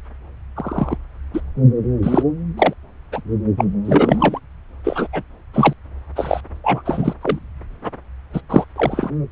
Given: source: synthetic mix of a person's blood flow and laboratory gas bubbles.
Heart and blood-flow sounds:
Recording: Doppler ultrasound of blood flow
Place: subclavian vein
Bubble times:
0.56-0.97 s: bubbles
1.33-1.41 s: bubbles
2.02-2.23 s: bubbles
2.56-2.73 s: bubbles
3.12-3.21 s: bubbles
3.57-3.65 s: bubbles
3.85-4.39 s: bubbles
4.83-5.08 s: bubbles
5.12-5.22 s: bubbles
5.53-5.73 s: bubbles
6.16-6.41 s: bubbles
6.63-6.82 s: bubbles
6.85-7.13 s: bubbles
7.21-7.39 s: bubbles
8.33-8.41 s: bubbles
8.49-8.65 s: bubbles
8.76-9.10 s: bubbles
From the record:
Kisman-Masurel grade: 243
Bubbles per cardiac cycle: several, 3 to 8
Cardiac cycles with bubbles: 100%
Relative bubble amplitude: loud (0.450 to 0.775)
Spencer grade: 3 (all of the cardiac periods contain showers or single bubble signals, but not dominating or overriding the cardiac motion signals)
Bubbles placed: anywhere in the cardiac cycle

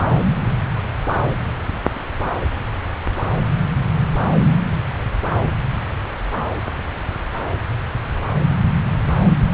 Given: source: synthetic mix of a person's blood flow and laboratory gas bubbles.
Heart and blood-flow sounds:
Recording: Doppler ultrasound of blood flow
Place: subclavian vein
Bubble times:
no bubbles
From the record:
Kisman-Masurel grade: 000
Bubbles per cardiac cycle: 0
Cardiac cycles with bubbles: 0%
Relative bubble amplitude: no bubbles discernible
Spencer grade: 0 (complete lack of bubble signals)

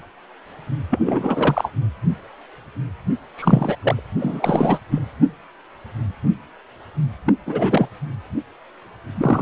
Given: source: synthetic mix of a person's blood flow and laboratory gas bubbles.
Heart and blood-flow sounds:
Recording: Doppler ultrasound of blood flow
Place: precordium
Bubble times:
0.91-1.72 s: bubbles
3.37-4.03 s: bubbles
4.20-4.79 s: bubbles
4.91-4.99 s: bubbles
7.26-7.33 s: bubbles
7.46-7.88 s: bubbles
9.16-9.42 s: bubbles
From the record:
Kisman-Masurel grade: 333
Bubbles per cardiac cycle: rolling drumbeat, 9 or more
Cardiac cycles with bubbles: 50 to 99%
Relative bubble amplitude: loud (0.450 to 0.775)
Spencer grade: 3 (all of the cardiac periods contain showers or single bubble signals, but not dominating or overriding the cardiac motion signals)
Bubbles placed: anywhere in the cardiac cycle

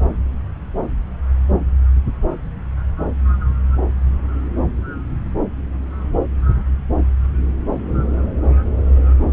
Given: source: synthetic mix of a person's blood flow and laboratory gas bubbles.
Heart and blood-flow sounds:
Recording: Doppler ultrasound of blood flow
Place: subclavian vein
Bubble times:
no bubbles
From the record:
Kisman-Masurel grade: 000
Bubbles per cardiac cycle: 0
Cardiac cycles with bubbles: 0%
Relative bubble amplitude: no bubbles discernible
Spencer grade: 0 (complete lack of bubble signals)

